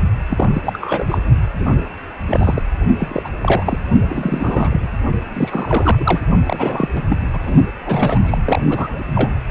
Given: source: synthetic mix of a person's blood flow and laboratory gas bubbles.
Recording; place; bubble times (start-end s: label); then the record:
Doppler ultrasound of blood flow; precordium
0.29-1.18 s: bubbles
1.59-1.87 s: bubbles
2.28-2.62 s: bubbles
2.98-3.29 s: bubbles
3.42-3.79 s: bubbles
4.06-4.88 s: bubbles
5.33-6.26 s: bubbles
6.46-6.89 s: bubbles
6.93-7.06 s: bubbles
7.09-7.17 s: bubbles
7.33-7.54 s: bubbles
7.85-8.38 s: bubbles
8.44-8.64 s: bubbles
8.68-9.00 s: bubbles
9.15-9.32 s: bubbles
From the record:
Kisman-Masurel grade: 342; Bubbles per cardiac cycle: rolling drumbeat, 9 or more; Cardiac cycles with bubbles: 100%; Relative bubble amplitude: moderate (0.250 to 0.450); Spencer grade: 3 (all of the cardiac periods contain showers or single bubble signals, but not dominating or overriding the cardiac motion signals); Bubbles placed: only in the low amplitude regions of the cardiac cycle